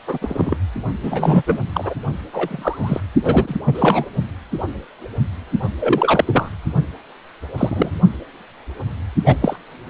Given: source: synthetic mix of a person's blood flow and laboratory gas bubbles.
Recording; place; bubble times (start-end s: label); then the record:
Doppler ultrasound of blood flow; precordium
0.07-0.18 s: bubbles
0.21-0.55 s: bubbles
1.02-1.43 s: bubbles
1.46-1.58 s: bubbles
1.72-1.94 s: bubbles
2.32-3.00 s: bubbles
3.23-3.57 s: bubbles
3.65-4.05 s: bubbles
5.80-6.50 s: bubbles
7.58-7.91 s: bubbles
9.25-9.36 s: bubbles
9.41-9.56 s: bubbles
9.88-9.90 s: bubbles
From the record:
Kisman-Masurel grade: 233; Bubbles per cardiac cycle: several, 3 to 8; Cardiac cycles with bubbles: 50 to 99%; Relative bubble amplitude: loud (0.450 to 0.775); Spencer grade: 3 (all of the cardiac periods contain showers or single bubble signals, but not dominating or overriding the cardiac motion signals); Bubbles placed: only in the low amplitude regions of the cardiac cycle